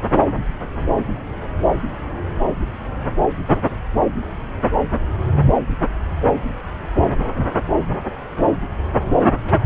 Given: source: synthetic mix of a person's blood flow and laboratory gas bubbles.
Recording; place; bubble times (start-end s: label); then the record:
Doppler ultrasound of blood flow; subclavian vein
9.44-9.66 s: bubbles
From the record:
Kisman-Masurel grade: 211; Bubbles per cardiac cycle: several, 3 to 8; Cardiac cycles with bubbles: 1 to 10%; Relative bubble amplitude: barely perceptible (0.100 to 0.250); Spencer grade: 1 (occasional bubble signal discernible with the cardiac motion signal, with majority of cardiac periods free of bubbles); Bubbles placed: anywhere in the cardiac cycle